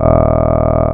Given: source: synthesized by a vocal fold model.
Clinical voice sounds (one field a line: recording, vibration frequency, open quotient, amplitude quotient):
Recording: sustained vowel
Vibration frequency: 40 Hz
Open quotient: 0.3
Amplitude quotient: 1.2